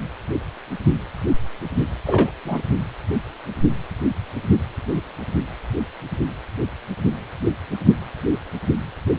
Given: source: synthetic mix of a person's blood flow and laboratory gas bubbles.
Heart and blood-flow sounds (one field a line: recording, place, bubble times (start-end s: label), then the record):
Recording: Doppler ultrasound of blood flow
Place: precordium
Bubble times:
2.06-2.31 s: bubbles
2.44-2.62 s: bubbles
From the record:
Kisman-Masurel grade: 212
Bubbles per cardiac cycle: several, 3 to 8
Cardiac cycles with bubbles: 1 to 10%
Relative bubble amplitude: moderate (0.250 to 0.450)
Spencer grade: 1 (occasional bubble signal discernible with the cardiac motion signal, with majority of cardiac periods free of bubbles)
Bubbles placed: only in the low amplitude regions of the cardiac cycle